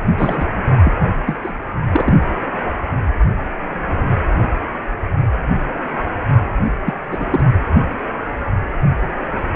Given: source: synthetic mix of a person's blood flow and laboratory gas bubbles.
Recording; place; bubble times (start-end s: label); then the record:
Doppler ultrasound of blood flow; precordium
0.17-0.45 s: bubbles
0.84-0.93 s: bubbles
0.98-1.08 s: bubbles
1.26-1.38 s: bubbles
1.43-1.52 s: bubbles
1.91-2.15 s: bubbles
6.85-6.94 s: bubbles
7.11-7.44 s: bubbles
From the record:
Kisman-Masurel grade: 222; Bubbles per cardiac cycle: several, 3 to 8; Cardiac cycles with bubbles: 10 to 50%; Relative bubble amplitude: moderate (0.250 to 0.450); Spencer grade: 2 (many but less than half of the cardiac periods contain bubble signals, singularly or in groups); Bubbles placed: anywhere in the cardiac cycle